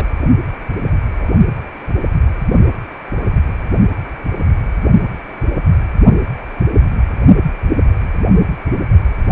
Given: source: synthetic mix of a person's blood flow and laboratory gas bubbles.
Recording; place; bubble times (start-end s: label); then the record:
Doppler ultrasound of blood flow; precordium
0.00-0.10 s: bubbles
1.21-1.28 s: bubbles
From the record:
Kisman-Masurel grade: 121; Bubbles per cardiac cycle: 1 to 2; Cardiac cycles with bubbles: 10 to 50%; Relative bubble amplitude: barely perceptible (0.100 to 0.250); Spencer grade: 2 (many but less than half of the cardiac periods contain bubble signals, singularly or in groups); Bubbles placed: only in the low amplitude regions of the cardiac cycle